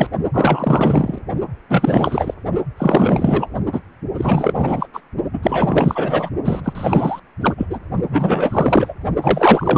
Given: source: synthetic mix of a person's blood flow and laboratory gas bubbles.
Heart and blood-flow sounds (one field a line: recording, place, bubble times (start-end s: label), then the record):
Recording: Doppler ultrasound of blood flow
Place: precordium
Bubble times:
0.00-0.08 s: bubbles
0.34-1.19 s: bubbles
1.69-2.34 s: bubbles
2.77-3.47 s: bubbles
3.72-3.80 s: bubbles
4.17-4.87 s: bubbles
4.93-5.00 s: bubbles
5.33-5.38 s: bubbles
5.42-6.30 s: bubbles
6.44-6.61 s: bubbles
6.64-7.20 s: bubbles
7.41-7.54 s: bubbles
7.58-7.66 s: bubbles
7.70-7.79 s: bubbles
8.11-8.93 s: bubbles
9.22-9.77 s: bubbles
From the record:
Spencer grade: 4 (maximum detectable bubble signal sounding continuously throughout systole and diastole of every cardiac period, and overriding the amplitude of the normal cardiac signals)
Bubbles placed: only in the low amplitude regions of the cardiac cycle